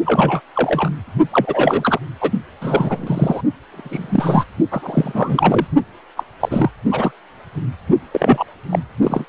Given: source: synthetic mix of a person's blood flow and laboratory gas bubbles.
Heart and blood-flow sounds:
Doppler ultrasound of blood flow; precordium
0.05-0.40 s: bubbles
0.55-0.90 s: bubbles
1.32-1.99 s: bubbles
2.20-2.32 s: bubbles
2.61-3.41 s: bubbles
3.71-4.44 s: bubbles
4.71-5.66 s: bubbles
6.17-6.24 s: bubbles
6.40-6.71 s: bubbles
6.91-7.12 s: bubbles
8.12-8.44 s: bubbles
8.70-8.79 s: bubbles
9.01-9.25 s: bubbles
From the record:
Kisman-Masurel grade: 243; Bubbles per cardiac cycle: several, 3 to 8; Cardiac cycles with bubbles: 100%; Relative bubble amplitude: loud (0.450 to 0.775); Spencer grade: 3 (all of the cardiac periods contain showers or single bubble signals, but not dominating or overriding the cardiac motion signals); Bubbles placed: only in the low amplitude regions of the cardiac cycle

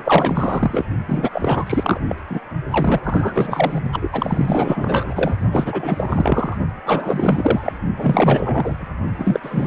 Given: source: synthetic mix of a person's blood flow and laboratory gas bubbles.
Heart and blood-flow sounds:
Doppler ultrasound of blood flow; precordium
0.00-0.84 s: bubbles
1.08-1.99 s: bubbles
2.08-2.15 s: bubbles
2.29-2.41 s: bubbles
2.70-3.00 s: bubbles
3.04-3.80 s: bubbles
3.91-4.09 s: bubbles
4.12-5.36 s: bubbles
5.52-6.57 s: bubbles
6.85-7.82 s: bubbles
7.97-8.88 s: bubbles
9.18-9.67 s: bubbles
From the record:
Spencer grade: 4 (maximum detectable bubble signal sounding continuously throughout systole and diastole of every cardiac period, and overriding the amplitude of the normal cardiac signals); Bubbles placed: only in the low amplitude regions of the cardiac cycle

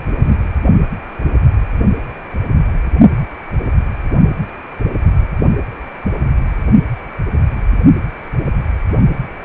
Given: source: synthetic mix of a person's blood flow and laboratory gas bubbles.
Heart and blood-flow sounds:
Doppler ultrasound of blood flow; precordium
0.23-0.35 s: bubbles
From the record:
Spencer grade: 1 (occasional bubble signal discernible with the cardiac motion signal, with majority of cardiac periods free of bubbles); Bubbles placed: only in the low amplitude regions of the cardiac cycle

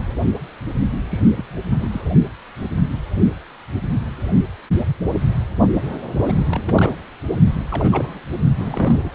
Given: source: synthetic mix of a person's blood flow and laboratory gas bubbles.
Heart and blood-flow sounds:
Doppler ultrasound of blood flow; precordium
1.10-1.20 s: bubbles
1.36-1.44 s: bubbles
1.70-2.01 s: bubbles
6.17-6.38 s: bubbles
6.46-6.96 s: bubbles
7.71-8.21 s: bubbles
8.57-9.12 s: bubbles
From the record:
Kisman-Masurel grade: 232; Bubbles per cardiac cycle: several, 3 to 8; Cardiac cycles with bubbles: 50 to 99%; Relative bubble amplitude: moderate (0.250 to 0.450); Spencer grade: 3 (all of the cardiac periods contain showers or single bubble signals, but not dominating or overriding the cardiac motion signals); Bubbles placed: only in the low amplitude regions of the cardiac cycle

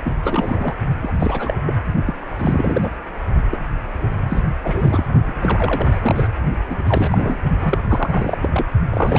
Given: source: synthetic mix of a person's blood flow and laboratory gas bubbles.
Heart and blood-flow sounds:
Doppler ultrasound of blood flow; precordium
0.05-0.15 s: bubbles
0.23-0.75 s: bubbles
1.02-1.12 s: bubbles
1.19-1.56 s: bubbles
1.66-1.75 s: bubbles
2.06-2.14 s: bubbles
2.38-2.90 s: bubbles
3.50-3.59 s: bubbles
4.01-4.44 s: bubbles
4.63-5.04 s: bubbles
5.26-5.97 s: bubbles
6.01-6.31 s: bubbles
6.68-6.77 s: bubbles
6.84-7.40 s: bubbles
7.59-7.79 s: bubbles
7.88-8.38 s: bubbles
8.40-8.49 s: bubbles
8.53-8.66 s: bubbles
8.91-9.19 s: bubbles
From the record:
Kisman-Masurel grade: 342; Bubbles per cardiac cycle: rolling drumbeat, 9 or more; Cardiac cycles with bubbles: 100%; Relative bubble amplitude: moderate (0.250 to 0.450); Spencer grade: 3 (all of the cardiac periods contain showers or single bubble signals, but not dominating or overriding the cardiac motion signals); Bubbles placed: only in the low amplitude regions of the cardiac cycle

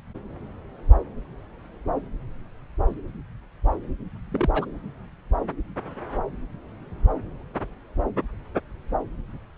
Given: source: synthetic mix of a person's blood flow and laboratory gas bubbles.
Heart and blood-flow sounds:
Doppler ultrasound of blood flow; subclavian vein
4.31-4.50 s: bubbles
4.54-4.66 s: bubbles
From the record:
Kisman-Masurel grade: 112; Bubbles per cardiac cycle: 1 to 2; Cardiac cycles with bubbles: 1 to 10%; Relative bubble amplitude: moderate (0.250 to 0.450); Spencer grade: 1 (occasional bubble signal discernible with the cardiac motion signal, with majority of cardiac periods free of bubbles); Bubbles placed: anywhere in the cardiac cycle

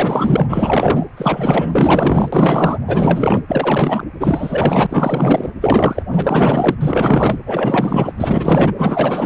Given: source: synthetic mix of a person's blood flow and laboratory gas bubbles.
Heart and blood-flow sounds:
Doppler ultrasound of blood flow; precordium
0.00-1.05 s: bubbles
1.17-2.29 s: bubbles
2.32-2.79 s: bubbles
2.87-3.40 s: bubbles
3.48-4.04 s: bubbles
4.20-4.87 s: bubbles
4.89-5.50 s: bubbles
5.61-6.03 s: bubbles
6.12-6.75 s: bubbles
6.80-7.38 s: bubbles
7.46-8.12 s: bubbles
8.16-8.72 s: bubbles
8.77-9.26 s: bubbles
From the record:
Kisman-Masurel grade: 444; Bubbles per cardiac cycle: continuous sound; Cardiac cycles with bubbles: 100%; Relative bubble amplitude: maximal (0.775 to 0.999); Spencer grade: 4 (maximum detectable bubble signal sounding continuously throughout systole and diastole of every cardiac period, and overriding the amplitude of the normal cardiac signals); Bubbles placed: anywhere in the cardiac cycle

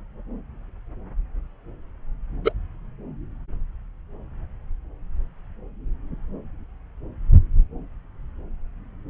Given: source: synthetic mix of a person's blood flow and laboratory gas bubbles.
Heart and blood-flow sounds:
Doppler ultrasound of blood flow; subclavian vein
2.44-2.52 s: bubbles
From the record:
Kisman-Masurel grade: 122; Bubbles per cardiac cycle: 1 to 2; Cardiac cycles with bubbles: 10 to 50%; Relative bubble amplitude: moderate (0.250 to 0.450); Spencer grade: 2 (many but less than half of the cardiac periods contain bubble signals, singularly or in groups); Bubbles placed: anywhere in the cardiac cycle

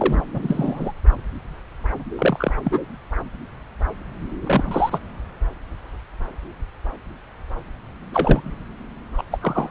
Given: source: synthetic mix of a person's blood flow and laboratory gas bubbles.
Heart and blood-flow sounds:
Doppler ultrasound of blood flow; subclavian vein
0.00-0.21 s: bubbles
0.33-0.91 s: bubbles
2.18-2.51 s: bubbles
2.63-2.80 s: bubbles
4.43-4.99 s: bubbles
8.12-8.56 s: bubbles
9.17-9.23 s: bubbles
9.31-9.38 s: bubbles
9.41-9.71 s: bubbles
From the record:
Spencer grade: 3 (all of the cardiac periods contain showers or single bubble signals, but not dominating or overriding the cardiac motion signals); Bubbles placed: anywhere in the cardiac cycle

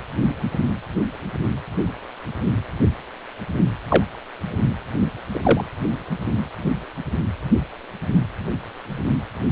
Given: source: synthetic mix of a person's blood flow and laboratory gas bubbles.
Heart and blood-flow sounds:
Doppler ultrasound of blood flow; precordium
3.88-4.04 s: bubbles
5.33-5.39 s: bubbles
5.43-5.64 s: bubbles
From the record:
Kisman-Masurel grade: 123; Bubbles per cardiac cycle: 1 to 2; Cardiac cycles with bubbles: 10 to 50%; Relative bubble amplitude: loud (0.450 to 0.775); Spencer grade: 2 (many but less than half of the cardiac periods contain bubble signals, singularly or in groups); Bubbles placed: anywhere in the cardiac cycle

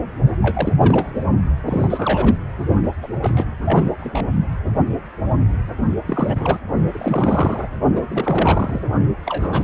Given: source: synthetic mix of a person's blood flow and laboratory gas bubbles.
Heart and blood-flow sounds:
Doppler ultrasound of blood flow; precordium
0.42-0.76 s: bubbles
0.79-1.23 s: bubbles
1.65-2.36 s: bubbles
3.03-3.08 s: bubbles
3.22-3.47 s: bubbles
3.64-3.94 s: bubbles
4.00-4.22 s: bubbles
6.06-6.58 s: bubbles
6.92-7.68 s: bubbles
7.96-8.04 s: bubbles
8.08-8.80 s: bubbles
9.25-9.64 s: bubbles
From the record:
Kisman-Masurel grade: 332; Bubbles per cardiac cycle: rolling drumbeat, 9 or more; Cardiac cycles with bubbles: 50 to 99%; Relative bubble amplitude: moderate (0.250 to 0.450); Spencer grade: 3 (all of the cardiac periods contain showers or single bubble signals, but not dominating or overriding the cardiac motion signals); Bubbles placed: only in the low amplitude regions of the cardiac cycle

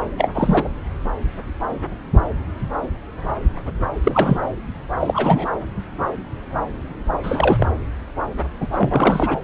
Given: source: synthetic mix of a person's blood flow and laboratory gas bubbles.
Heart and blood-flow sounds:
Doppler ultrasound of blood flow; subclavian vein
0.17-0.29 s: bubbles
0.35-0.69 s: bubbles
4.04-4.40 s: bubbles
4.99-5.47 s: bubbles
7.23-7.69 s: bubbles
8.60-8.68 s: bubbles
8.72-9.37 s: bubbles
From the record:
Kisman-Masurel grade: 223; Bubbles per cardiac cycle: several, 3 to 8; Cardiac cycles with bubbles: 10 to 50%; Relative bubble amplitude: loud (0.450 to 0.775); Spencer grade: 2 (many but less than half of the cardiac periods contain bubble signals, singularly or in groups); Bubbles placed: anywhere in the cardiac cycle

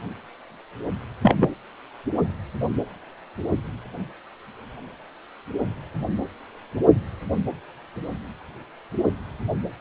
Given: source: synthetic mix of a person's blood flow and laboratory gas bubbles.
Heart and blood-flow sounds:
Doppler ultrasound of blood flow; precordium
1.22-1.54 s: bubbles
From the record:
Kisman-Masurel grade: 113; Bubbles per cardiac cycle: 1 to 2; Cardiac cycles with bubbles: 1 to 10%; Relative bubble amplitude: loud (0.450 to 0.775); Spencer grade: 1 (occasional bubble signal discernible with the cardiac motion signal, with majority of cardiac periods free of bubbles); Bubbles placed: anywhere in the cardiac cycle

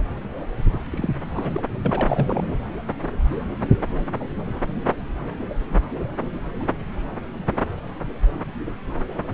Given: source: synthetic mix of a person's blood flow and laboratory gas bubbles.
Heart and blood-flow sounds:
Doppler ultrasound of blood flow; subclavian vein
0.90-1.09 s: bubbles
1.34-1.61 s: bubbles
1.85-2.42 s: bubbles
From the record:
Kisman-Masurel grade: 222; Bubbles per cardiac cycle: several, 3 to 8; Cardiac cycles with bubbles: 10 to 50%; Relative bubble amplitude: moderate (0.250 to 0.450); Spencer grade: 2 (many but less than half of the cardiac periods contain bubble signals, singularly or in groups); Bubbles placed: anywhere in the cardiac cycle

